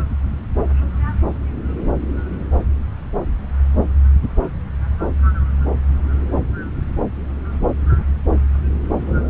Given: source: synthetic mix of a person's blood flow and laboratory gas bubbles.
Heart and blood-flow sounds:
Doppler ultrasound of blood flow; subclavian vein
no bubbles
From the record:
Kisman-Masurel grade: 000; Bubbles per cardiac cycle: 0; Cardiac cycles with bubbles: 0%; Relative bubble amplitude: no bubbles discernible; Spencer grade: 0 (complete lack of bubble signals)

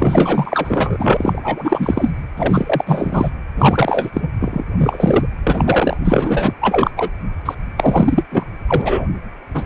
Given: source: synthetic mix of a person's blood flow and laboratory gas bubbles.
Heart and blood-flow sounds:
Doppler ultrasound of blood flow; precordium
0.00-2.10 s: bubbles
2.37-3.30 s: bubbles
3.56-4.11 s: bubbles
4.13-4.30 s: bubbles
4.40-4.65 s: bubbles
4.77-5.26 s: bubbles
5.43-5.96 s: bubbles
6.04-6.53 s: bubbles
6.61-6.91 s: bubbles
6.96-7.09 s: bubbles
7.45-7.55 s: bubbles
7.76-8.22 s: bubbles
8.30-8.44 s: bubbles
8.67-9.06 s: bubbles
9.54-9.63 s: bubbles
From the record:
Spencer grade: 4 (maximum detectable bubble signal sounding continuously throughout systole and diastole of every cardiac period, and overriding the amplitude of the normal cardiac signals); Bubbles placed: anywhere in the cardiac cycle

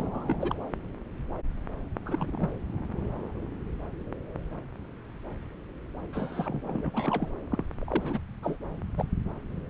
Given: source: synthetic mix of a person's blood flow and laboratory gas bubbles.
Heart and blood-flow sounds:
Doppler ultrasound of blood flow; subclavian vein
0.00-0.56 s: bubbles
2.06-2.50 s: bubbles
6.12-6.91 s: bubbles
6.93-7.29 s: bubbles
7.52-7.63 s: bubbles
7.82-8.19 s: bubbles
8.43-8.57 s: bubbles
8.97-9.05 s: bubbles
From the record:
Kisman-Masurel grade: 221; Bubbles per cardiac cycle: several, 3 to 8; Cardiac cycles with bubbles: 10 to 50%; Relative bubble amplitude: barely perceptible (0.100 to 0.250); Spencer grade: 2 (many but less than half of the cardiac periods contain bubble signals, singularly or in groups); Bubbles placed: anywhere in the cardiac cycle

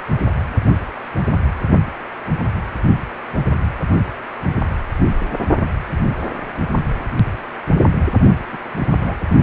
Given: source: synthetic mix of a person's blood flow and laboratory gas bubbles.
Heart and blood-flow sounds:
Doppler ultrasound of blood flow; precordium
8.52-8.59 s: bubbles
8.78-8.88 s: bubbles
8.97-9.17 s: bubbles
From the record:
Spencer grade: 1 (occasional bubble signal discernible with the cardiac motion signal, with majority of cardiac periods free of bubbles); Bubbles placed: only in the low amplitude regions of the cardiac cycle

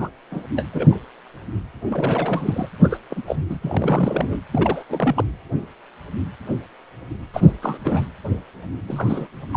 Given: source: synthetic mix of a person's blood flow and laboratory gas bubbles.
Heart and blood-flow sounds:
Doppler ultrasound of blood flow; precordium
0.00-0.09 s: bubbles
0.31-0.43 s: bubbles
0.55-0.65 s: bubbles
0.72-0.99 s: bubbles
1.86-2.69 s: bubbles
2.83-2.97 s: bubbles
3.10-3.22 s: bubbles
3.26-3.45 s: bubbles
3.49-3.58 s: bubbles
3.62-4.40 s: bubbles
4.52-4.85 s: bubbles
4.90-5.24 s: bubbles
7.33-7.53 s: bubbles
7.62-7.79 s: bubbles
7.84-8.08 s: bubbles
8.88-9.27 s: bubbles
9.53-9.57 s: bubbles
From the record:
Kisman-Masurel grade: 332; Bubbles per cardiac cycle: rolling drumbeat, 9 or more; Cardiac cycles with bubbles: 50 to 99%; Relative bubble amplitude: moderate (0.250 to 0.450); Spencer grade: 3 (all of the cardiac periods contain showers or single bubble signals, but not dominating or overriding the cardiac motion signals); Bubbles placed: anywhere in the cardiac cycle

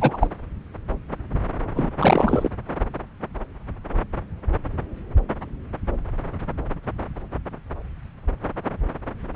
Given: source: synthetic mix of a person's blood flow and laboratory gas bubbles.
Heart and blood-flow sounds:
Doppler ultrasound of blood flow; subclavian vein
0.00-0.28 s: bubbles
1.75-1.91 s: bubbles
1.98-2.49 s: bubbles
From the record:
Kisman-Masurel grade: 223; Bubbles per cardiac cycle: several, 3 to 8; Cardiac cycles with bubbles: 10 to 50%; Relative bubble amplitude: loud (0.450 to 0.775); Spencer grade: 2 (many but less than half of the cardiac periods contain bubble signals, singularly or in groups); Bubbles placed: anywhere in the cardiac cycle

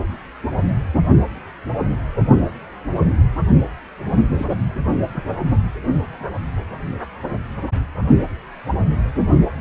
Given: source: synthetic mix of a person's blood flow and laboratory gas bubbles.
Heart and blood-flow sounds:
Doppler ultrasound of blood flow; precordium
4.34-4.46 s: bubbles
5.12-5.24 s: bubbles
From the record:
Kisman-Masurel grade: 121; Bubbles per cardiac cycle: 1 to 2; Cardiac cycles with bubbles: 10 to 50%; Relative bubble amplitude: barely perceptible (0.100 to 0.250); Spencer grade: 2 (many but less than half of the cardiac periods contain bubble signals, singularly or in groups); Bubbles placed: only in the low amplitude regions of the cardiac cycle

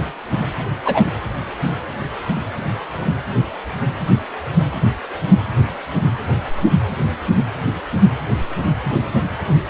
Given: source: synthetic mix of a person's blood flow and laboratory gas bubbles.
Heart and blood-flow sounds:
Doppler ultrasound of blood flow; precordium
0.84-1.05 s: bubbles
From the record:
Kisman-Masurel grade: 113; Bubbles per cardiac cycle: 1 to 2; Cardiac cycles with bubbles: 1 to 10%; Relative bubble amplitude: loud (0.450 to 0.775); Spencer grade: 1 (occasional bubble signal discernible with the cardiac motion signal, with majority of cardiac periods free of bubbles); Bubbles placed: anywhere in the cardiac cycle

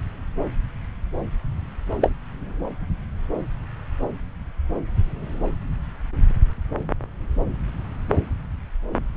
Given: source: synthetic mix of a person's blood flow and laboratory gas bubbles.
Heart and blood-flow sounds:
Doppler ultrasound of blood flow; subclavian vein
2.01-2.10 s: bubbles
From the record:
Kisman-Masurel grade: 113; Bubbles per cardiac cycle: 1 to 2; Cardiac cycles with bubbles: 1 to 10%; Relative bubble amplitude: loud (0.450 to 0.775); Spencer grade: 1 (occasional bubble signal discernible with the cardiac motion signal, with majority of cardiac periods free of bubbles); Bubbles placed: anywhere in the cardiac cycle

